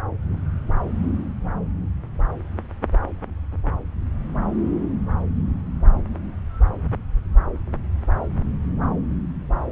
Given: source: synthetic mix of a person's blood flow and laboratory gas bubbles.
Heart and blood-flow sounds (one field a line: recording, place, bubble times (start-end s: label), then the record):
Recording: Doppler ultrasound of blood flow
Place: subclavian vein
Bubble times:
no bubbles
From the record:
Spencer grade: 0 (complete lack of bubble signals)